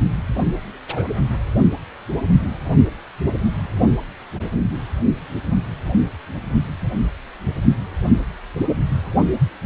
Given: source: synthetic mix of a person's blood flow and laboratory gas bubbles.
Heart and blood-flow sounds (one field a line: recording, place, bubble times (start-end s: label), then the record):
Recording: Doppler ultrasound of blood flow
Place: precordium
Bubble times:
0.88-1.03 s: bubbles
From the record:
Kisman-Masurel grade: 112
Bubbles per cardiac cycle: 1 to 2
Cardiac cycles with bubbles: 1 to 10%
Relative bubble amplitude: moderate (0.250 to 0.450)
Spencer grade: 1 (occasional bubble signal discernible with the cardiac motion signal, with majority of cardiac periods free of bubbles)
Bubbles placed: anywhere in the cardiac cycle